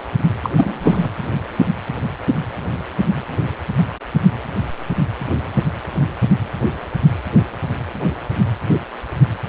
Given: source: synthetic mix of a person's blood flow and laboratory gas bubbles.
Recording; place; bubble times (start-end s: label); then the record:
Doppler ultrasound of blood flow; precordium
0.42-0.50 s: bubbles
0.56-1.09 s: bubbles
From the record:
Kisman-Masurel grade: 213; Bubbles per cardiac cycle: several, 3 to 8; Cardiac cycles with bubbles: 1 to 10%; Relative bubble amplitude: loud (0.450 to 0.775); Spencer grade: 1 (occasional bubble signal discernible with the cardiac motion signal, with majority of cardiac periods free of bubbles); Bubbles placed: anywhere in the cardiac cycle